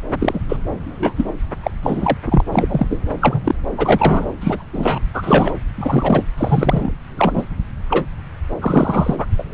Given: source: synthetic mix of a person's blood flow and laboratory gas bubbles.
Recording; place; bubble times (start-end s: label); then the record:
Doppler ultrasound of blood flow; subclavian vein
0.20-0.40 s: bubbles
0.48-0.56 s: bubbles
0.84-1.13 s: bubbles
1.16-1.25 s: bubbles
1.63-1.71 s: bubbles
1.83-2.18 s: bubbles
2.24-2.43 s: bubbles
2.52-2.87 s: bubbles
2.90-2.99 s: bubbles
3.21-3.55 s: bubbles
3.77-4.25 s: bubbles
4.41-4.64 s: bubbles
4.73-5.00 s: bubbles
5.13-5.54 s: bubbles
5.75-6.23 s: bubbles
6.38-6.92 s: bubbles
7.17-7.44 s: bubbles
7.90-8.05 s: bubbles
8.61-9.25 s: bubbles
9.38-9.43 s: bubbles
From the record:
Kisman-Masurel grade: 243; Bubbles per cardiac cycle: several, 3 to 8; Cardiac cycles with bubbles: 100%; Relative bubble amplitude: loud (0.450 to 0.775); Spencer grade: 3 (all of the cardiac periods contain showers or single bubble signals, but not dominating or overriding the cardiac motion signals); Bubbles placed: anywhere in the cardiac cycle